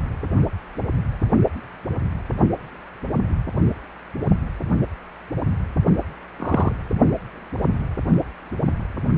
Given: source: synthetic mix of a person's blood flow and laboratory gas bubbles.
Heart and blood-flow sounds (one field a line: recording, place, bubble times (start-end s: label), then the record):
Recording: Doppler ultrasound of blood flow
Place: precordium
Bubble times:
6.39-6.72 s: bubbles
From the record:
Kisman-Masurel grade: 112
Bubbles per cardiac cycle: 1 to 2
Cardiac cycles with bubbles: 1 to 10%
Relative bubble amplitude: moderate (0.250 to 0.450)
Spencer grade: 1 (occasional bubble signal discernible with the cardiac motion signal, with majority of cardiac periods free of bubbles)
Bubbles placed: only in the low amplitude regions of the cardiac cycle